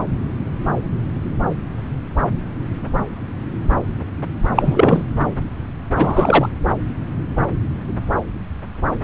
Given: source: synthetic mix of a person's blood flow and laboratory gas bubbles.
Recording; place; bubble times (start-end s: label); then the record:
Doppler ultrasound of blood flow; subclavian vein
4.55-5.04 s: bubbles
5.97-6.49 s: bubbles
From the record:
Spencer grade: 2 (many but less than half of the cardiac periods contain bubble signals, singularly or in groups); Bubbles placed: anywhere in the cardiac cycle